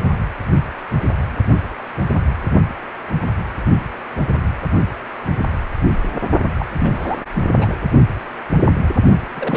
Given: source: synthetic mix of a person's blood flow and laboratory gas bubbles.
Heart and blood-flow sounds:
Doppler ultrasound of blood flow; precordium
6.53-6.66 s: bubbles
6.79-7.18 s: bubbles
7.33-7.50 s: bubbles
7.58-7.75 s: bubbles
9.36-9.57 s: bubbles
From the record:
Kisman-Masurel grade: 222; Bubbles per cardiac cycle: several, 3 to 8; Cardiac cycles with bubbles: 10 to 50%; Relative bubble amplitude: moderate (0.250 to 0.450); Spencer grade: 2 (many but less than half of the cardiac periods contain bubble signals, singularly or in groups); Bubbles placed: only in the low amplitude regions of the cardiac cycle

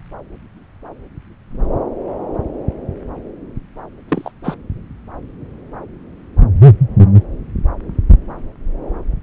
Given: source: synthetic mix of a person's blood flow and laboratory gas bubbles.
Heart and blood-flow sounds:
Doppler ultrasound of blood flow; subclavian vein
4.08-4.32 s: bubbles
4.44-4.55 s: bubbles
From the record:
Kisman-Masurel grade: 112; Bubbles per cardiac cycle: 1 to 2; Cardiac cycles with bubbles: 1 to 10%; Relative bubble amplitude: moderate (0.250 to 0.450); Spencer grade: 1 (occasional bubble signal discernible with the cardiac motion signal, with majority of cardiac periods free of bubbles); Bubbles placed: anywhere in the cardiac cycle

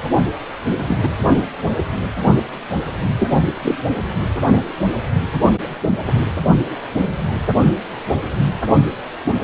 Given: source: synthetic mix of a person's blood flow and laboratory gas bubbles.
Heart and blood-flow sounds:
Doppler ultrasound of blood flow; precordium
0.88-1.00 s: bubbles
1.02-1.09 s: bubbles
2.25-2.35 s: bubbles
3.19-3.28 s: bubbles
3.62-3.75 s: bubbles
From the record:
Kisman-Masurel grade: 123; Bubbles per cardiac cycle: 1 to 2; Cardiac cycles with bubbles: 10 to 50%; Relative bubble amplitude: loud (0.450 to 0.775); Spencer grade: 2 (many but less than half of the cardiac periods contain bubble signals, singularly or in groups); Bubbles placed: anywhere in the cardiac cycle

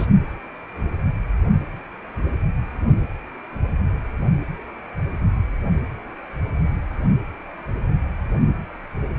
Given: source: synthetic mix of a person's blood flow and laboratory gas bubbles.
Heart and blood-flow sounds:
Doppler ultrasound of blood flow; precordium
0.00-0.07 s: bubbles
From the record:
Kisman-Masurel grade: 213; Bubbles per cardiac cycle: several, 3 to 8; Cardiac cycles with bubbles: 1 to 10%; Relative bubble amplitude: loud (0.450 to 0.775); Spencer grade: 1 (occasional bubble signal discernible with the cardiac motion signal, with majority of cardiac periods free of bubbles); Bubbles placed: only in the low amplitude regions of the cardiac cycle

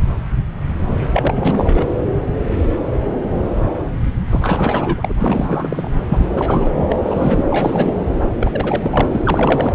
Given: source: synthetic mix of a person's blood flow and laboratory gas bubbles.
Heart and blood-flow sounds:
Doppler ultrasound of blood flow; subclavian vein
1.12-1.86 s: bubbles
4.30-5.13 s: bubbles
5.18-5.91 s: bubbles
6.09-6.25 s: bubbles
6.35-6.71 s: bubbles
6.76-6.85 s: bubbles
6.89-6.96 s: bubbles
7.06-7.43 s: bubbles
7.50-7.98 s: bubbles
8.41-9.05 s: bubbles
9.12-9.21 s: bubbles
9.23-9.75 s: bubbles
From the record:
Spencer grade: 3 (all of the cardiac periods contain showers or single bubble signals, but not dominating or overriding the cardiac motion signals); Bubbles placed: anywhere in the cardiac cycle

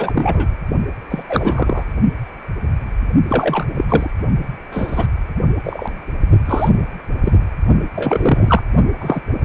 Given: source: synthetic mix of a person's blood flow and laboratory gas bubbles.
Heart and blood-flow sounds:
Doppler ultrasound of blood flow; precordium
0.00-0.49 s: bubbles
1.10-1.23 s: bubbles
1.29-1.83 s: bubbles
3.28-3.65 s: bubbles
3.77-3.85 s: bubbles
3.88-4.11 s: bubbles
4.71-5.07 s: bubbles
5.64-5.90 s: bubbles
6.45-6.70 s: bubbles
7.25-7.38 s: bubbles
7.93-8.62 s: bubbles
9.01-9.21 s: bubbles
From the record:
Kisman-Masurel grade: 233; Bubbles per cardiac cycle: several, 3 to 8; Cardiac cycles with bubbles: 50 to 99%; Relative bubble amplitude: loud (0.450 to 0.775); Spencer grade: 3 (all of the cardiac periods contain showers or single bubble signals, but not dominating or overriding the cardiac motion signals); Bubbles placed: only in the low amplitude regions of the cardiac cycle

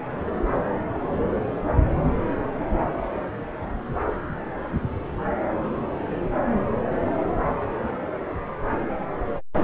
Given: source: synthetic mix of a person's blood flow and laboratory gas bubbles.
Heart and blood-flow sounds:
Doppler ultrasound of blood flow; subclavian vein
no bubbles
From the record:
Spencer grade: 0 (complete lack of bubble signals)

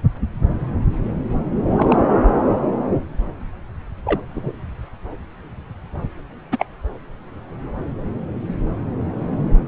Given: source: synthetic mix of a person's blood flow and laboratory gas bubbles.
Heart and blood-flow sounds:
Doppler ultrasound of blood flow; subclavian vein
1.76-2.00 s: bubbles
4.05-4.20 s: bubbles
4.34-4.53 s: bubbles
6.51-6.66 s: bubbles
From the record:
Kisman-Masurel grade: 123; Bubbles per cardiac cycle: 1 to 2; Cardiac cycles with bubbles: 10 to 50%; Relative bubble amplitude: loud (0.450 to 0.775); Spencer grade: 2 (many but less than half of the cardiac periods contain bubble signals, singularly or in groups); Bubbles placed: anywhere in the cardiac cycle

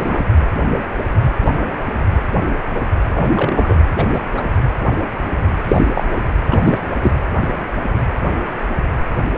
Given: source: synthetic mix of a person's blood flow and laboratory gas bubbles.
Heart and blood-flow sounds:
Doppler ultrasound of blood flow; precordium
0.00-0.19 s: bubbles
3.15-3.77 s: bubbles
3.97-4.20 s: bubbles
4.33-4.43 s: bubbles
5.65-5.88 s: bubbles
5.94-6.04 s: bubbles
6.50-6.79 s: bubbles
7.01-7.11 s: bubbles
From the record:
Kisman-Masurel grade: 223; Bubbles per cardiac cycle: several, 3 to 8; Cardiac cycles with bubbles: 10 to 50%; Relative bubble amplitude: loud (0.450 to 0.775); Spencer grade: 2 (many but less than half of the cardiac periods contain bubble signals, singularly or in groups); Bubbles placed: anywhere in the cardiac cycle

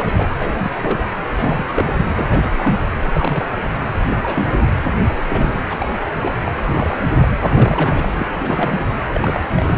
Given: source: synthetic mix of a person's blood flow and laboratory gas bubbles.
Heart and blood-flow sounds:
Doppler ultrasound of blood flow; precordium
0.00-0.28 s: bubbles
0.40-1.08 s: bubbles
1.31-1.64 s: bubbles
1.68-2.02 s: bubbles
2.15-2.25 s: bubbles
2.29-2.82 s: bubbles
3.02-3.48 s: bubbles
3.54-3.70 s: bubbles
4.08-4.17 s: bubbles
4.22-4.69 s: bubbles
5.15-5.61 s: bubbles
5.67-5.91 s: bubbles
6.00-6.14 s: bubbles
6.20-6.34 s: bubbles
6.46-6.53 s: bubbles
6.57-7.00 s: bubbles
7.21-8.12 s: bubbles
8.16-8.27 s: bubbles
8.31-8.81 s: bubbles
9.12-9.40 s: bubbles
9.56-9.78 s: bubbles
From the record:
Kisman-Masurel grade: 342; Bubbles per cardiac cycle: rolling drumbeat, 9 or more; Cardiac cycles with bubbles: 100%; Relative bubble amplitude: moderate (0.250 to 0.450); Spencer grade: 3 (all of the cardiac periods contain showers or single bubble signals, but not dominating or overriding the cardiac motion signals); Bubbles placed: anywhere in the cardiac cycle

